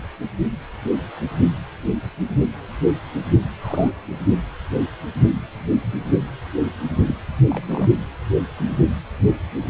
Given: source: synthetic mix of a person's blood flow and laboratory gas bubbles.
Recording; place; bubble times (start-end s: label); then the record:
Doppler ultrasound of blood flow; precordium
3.62-3.90 s: bubbles
7.08-7.15 s: bubbles
7.49-7.88 s: bubbles
8.58-8.77 s: bubbles
From the record:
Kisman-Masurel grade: 121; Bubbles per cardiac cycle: 1 to 2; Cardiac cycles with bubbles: 10 to 50%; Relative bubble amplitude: barely perceptible (0.100 to 0.250); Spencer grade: 2 (many but less than half of the cardiac periods contain bubble signals, singularly or in groups); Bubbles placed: only in the low amplitude regions of the cardiac cycle